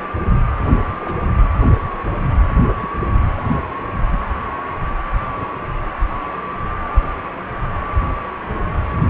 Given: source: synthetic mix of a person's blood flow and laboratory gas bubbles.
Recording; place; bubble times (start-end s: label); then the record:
Doppler ultrasound of blood flow; precordium
1.01-1.31 s: bubbles
2.80-2.89 s: bubbles
From the record:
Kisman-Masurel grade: 121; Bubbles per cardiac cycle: 1 to 2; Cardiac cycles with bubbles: 10 to 50%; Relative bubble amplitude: barely perceptible (0.100 to 0.250); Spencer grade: 2 (many but less than half of the cardiac periods contain bubble signals, singularly or in groups); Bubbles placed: only in the low amplitude regions of the cardiac cycle